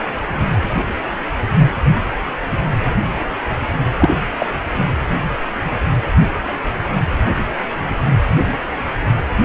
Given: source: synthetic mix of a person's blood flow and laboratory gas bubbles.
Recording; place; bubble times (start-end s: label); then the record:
Doppler ultrasound of blood flow; precordium
3.99-4.21 s: bubbles
4.39-4.46 s: bubbles
From the record:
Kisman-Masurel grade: 213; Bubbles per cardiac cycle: several, 3 to 8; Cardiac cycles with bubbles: 1 to 10%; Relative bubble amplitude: loud (0.450 to 0.775); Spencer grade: 1 (occasional bubble signal discernible with the cardiac motion signal, with majority of cardiac periods free of bubbles); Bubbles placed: anywhere in the cardiac cycle